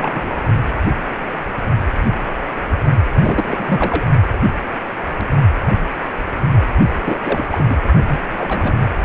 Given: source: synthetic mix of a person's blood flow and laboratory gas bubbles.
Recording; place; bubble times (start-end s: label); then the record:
Doppler ultrasound of blood flow; precordium
0.00-0.39 s: bubbles
3.16-4.07 s: bubbles
7.04-7.20 s: bubbles
7.22-7.47 s: bubbles
7.51-7.64 s: bubbles
7.68-7.77 s: bubbles
8.06-8.20 s: bubbles
8.30-8.74 s: bubbles
From the record:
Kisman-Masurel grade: 332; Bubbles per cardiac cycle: rolling drumbeat, 9 or more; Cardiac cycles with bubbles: 50 to 99%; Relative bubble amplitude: moderate (0.250 to 0.450); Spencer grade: 3 (all of the cardiac periods contain showers or single bubble signals, but not dominating or overriding the cardiac motion signals); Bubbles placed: only in the low amplitude regions of the cardiac cycle